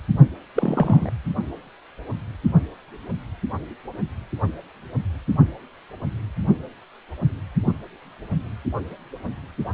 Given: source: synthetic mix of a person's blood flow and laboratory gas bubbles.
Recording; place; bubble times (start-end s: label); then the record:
Doppler ultrasound of blood flow; precordium
0.56-1.09 s: bubbles
From the record:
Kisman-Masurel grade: 112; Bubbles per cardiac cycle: 1 to 2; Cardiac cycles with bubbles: 1 to 10%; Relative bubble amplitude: moderate (0.250 to 0.450); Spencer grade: 1 (occasional bubble signal discernible with the cardiac motion signal, with majority of cardiac periods free of bubbles); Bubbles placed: only in the low amplitude regions of the cardiac cycle